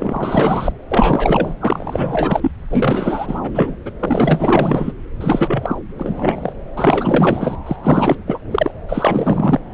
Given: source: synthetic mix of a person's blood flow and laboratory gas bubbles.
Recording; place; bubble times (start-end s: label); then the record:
Doppler ultrasound of blood flow; subclavian vein
0.00-0.72 s: bubbles
0.91-1.54 s: bubbles
1.60-2.51 s: bubbles
2.69-3.40 s: bubbles
3.43-3.75 s: bubbles
3.85-3.90 s: bubbles
3.99-4.92 s: bubbles
5.21-5.76 s: bubbles
5.98-6.53 s: bubbles
6.77-7.56 s: bubbles
7.66-7.76 s: bubbles
7.83-8.16 s: bubbles
8.26-8.38 s: bubbles
8.51-8.71 s: bubbles
8.88-9.60 s: bubbles
From the record:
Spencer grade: 4 (maximum detectable bubble signal sounding continuously throughout systole and diastole of every cardiac period, and overriding the amplitude of the normal cardiac signals); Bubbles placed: anywhere in the cardiac cycle